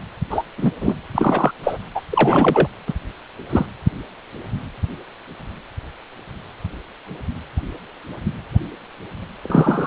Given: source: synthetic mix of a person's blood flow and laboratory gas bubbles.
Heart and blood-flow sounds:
Doppler ultrasound of blood flow; precordium
0.29-0.42 s: bubbles
0.57-0.72 s: bubbles
0.80-0.95 s: bubbles
1.15-1.51 s: bubbles
1.63-1.78 s: bubbles
1.94-2.01 s: bubbles
2.10-2.67 s: bubbles
2.86-2.94 s: bubbles
3.50-3.66 s: bubbles
9.43-9.87 s: bubbles
From the record:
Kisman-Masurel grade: 223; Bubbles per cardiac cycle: several, 3 to 8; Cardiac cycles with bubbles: 10 to 50%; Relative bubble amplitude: loud (0.450 to 0.775); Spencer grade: 2 (many but less than half of the cardiac periods contain bubble signals, singularly or in groups); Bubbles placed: anywhere in the cardiac cycle

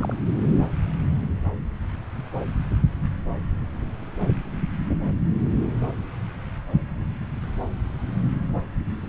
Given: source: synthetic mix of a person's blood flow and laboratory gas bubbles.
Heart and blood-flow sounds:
Doppler ultrasound of blood flow; subclavian vein
0.00-0.16 s: bubbles
9.02-9.07 s: bubbles
From the record:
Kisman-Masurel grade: 211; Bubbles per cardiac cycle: several, 3 to 8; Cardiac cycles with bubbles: 1 to 10%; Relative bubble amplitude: barely perceptible (0.100 to 0.250); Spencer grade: 1 (occasional bubble signal discernible with the cardiac motion signal, with majority of cardiac periods free of bubbles); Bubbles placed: anywhere in the cardiac cycle

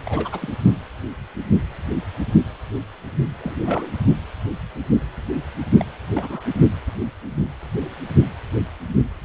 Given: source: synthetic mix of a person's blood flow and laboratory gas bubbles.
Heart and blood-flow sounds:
Doppler ultrasound of blood flow; precordium
0.00-0.57 s: bubbles
3.40-3.87 s: bubbles
5.77-5.86 s: bubbles
6.13-6.42 s: bubbles
From the record:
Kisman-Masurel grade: 221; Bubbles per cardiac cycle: several, 3 to 8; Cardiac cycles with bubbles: 10 to 50%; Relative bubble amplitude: barely perceptible (0.100 to 0.250); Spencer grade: 2 (many but less than half of the cardiac periods contain bubble signals, singularly or in groups); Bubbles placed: only in the low amplitude regions of the cardiac cycle

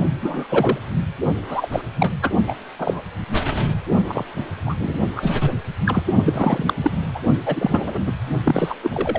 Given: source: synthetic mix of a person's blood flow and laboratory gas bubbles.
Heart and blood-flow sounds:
Doppler ultrasound of blood flow; precordium
0.21-0.47 s: bubbles
0.49-0.79 s: bubbles
1.48-1.68 s: bubbles
1.72-1.82 s: bubbles
1.98-2.14 s: bubbles
2.22-2.31 s: bubbles
2.46-2.54 s: bubbles
2.78-3.01 s: bubbles
4.08-4.24 s: bubbles
4.66-4.75 s: bubbles
4.79-4.98 s: bubbles
5.16-5.35 s: bubbles
5.41-5.57 s: bubbles
5.86-6.03 s: bubbles
6.25-6.74 s: bubbles
6.77-6.92 s: bubbles
7.15-7.20 s: bubbles
7.45-7.99 s: bubbles
8.06-8.12 s: bubbles
8.45-8.75 s: bubbles
8.82-9.19 s: bubbles
From the record:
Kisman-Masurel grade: 243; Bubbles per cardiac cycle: several, 3 to 8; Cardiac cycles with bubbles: 100%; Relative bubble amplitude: loud (0.450 to 0.775); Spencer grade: 3 (all of the cardiac periods contain showers or single bubble signals, but not dominating or overriding the cardiac motion signals); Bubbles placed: only in the low amplitude regions of the cardiac cycle

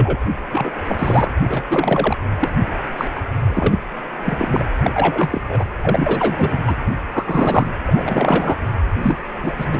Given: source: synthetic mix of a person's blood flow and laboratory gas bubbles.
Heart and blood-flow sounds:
Doppler ultrasound of blood flow; precordium
0.00-0.19 s: bubbles
0.52-0.71 s: bubbles
0.84-1.30 s: bubbles
1.46-1.64 s: bubbles
1.69-2.17 s: bubbles
2.40-2.49 s: bubbles
2.97-3.08 s: bubbles
3.15-3.21 s: bubbles
3.45-3.78 s: bubbles
4.25-4.63 s: bubbles
4.79-4.91 s: bubbles
4.94-5.41 s: bubbles
5.47-5.65 s: bubbles
5.82-6.59 s: bubbles
6.67-6.74 s: bubbles
7.12-7.67 s: bubbles
7.83-8.58 s: bubbles
9.02-9.17 s: bubbles
9.42-9.54 s: bubbles
9.57-9.66 s: bubbles
9.70-9.80 s: bubbles
From the record:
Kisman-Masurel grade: 343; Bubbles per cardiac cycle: rolling drumbeat, 9 or more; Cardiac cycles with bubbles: 100%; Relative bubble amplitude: loud (0.450 to 0.775); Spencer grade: 3 (all of the cardiac periods contain showers or single bubble signals, but not dominating or overriding the cardiac motion signals); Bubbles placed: anywhere in the cardiac cycle

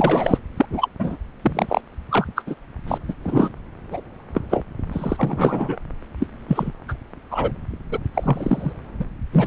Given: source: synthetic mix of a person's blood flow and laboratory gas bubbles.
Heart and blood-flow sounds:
Doppler ultrasound of blood flow; subclavian vein
0.00-0.38 s: bubbles
0.56-0.66 s: bubbles
0.70-0.89 s: bubbles
0.98-1.16 s: bubbles
1.42-1.81 s: bubbles
2.09-2.28 s: bubbles
2.35-2.43 s: bubbles
2.47-2.55 s: bubbles
2.88-2.98 s: bubbles
3.08-3.14 s: bubbles
3.24-3.51 s: bubbles
3.91-4.00 s: bubbles
4.34-4.42 s: bubbles
4.50-4.65 s: bubbles
4.92-5.78 s: bubbles
6.19-6.28 s: bubbles
6.48-6.71 s: bubbles
6.88-6.94 s: bubbles
7.30-7.52 s: bubbles
7.91-7.98 s: bubbles
8.13-8.72 s: bubbles
8.99-9.05 s: bubbles
9.32-9.46 s: bubbles
From the record:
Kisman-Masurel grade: 243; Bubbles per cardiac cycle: several, 3 to 8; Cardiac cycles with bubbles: 100%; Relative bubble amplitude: loud (0.450 to 0.775); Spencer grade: 3 (all of the cardiac periods contain showers or single bubble signals, but not dominating or overriding the cardiac motion signals); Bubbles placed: anywhere in the cardiac cycle

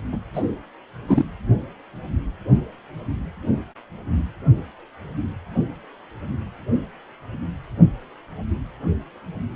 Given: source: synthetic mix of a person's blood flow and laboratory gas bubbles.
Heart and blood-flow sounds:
Doppler ultrasound of blood flow; precordium
0.12-0.17 s: bubbles
0.34-0.43 s: bubbles
1.07-1.25 s: bubbles
From the record:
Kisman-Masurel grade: 222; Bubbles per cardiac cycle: several, 3 to 8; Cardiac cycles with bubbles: 10 to 50%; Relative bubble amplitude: moderate (0.250 to 0.450); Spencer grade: 2 (many but less than half of the cardiac periods contain bubble signals, singularly or in groups); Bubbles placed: anywhere in the cardiac cycle

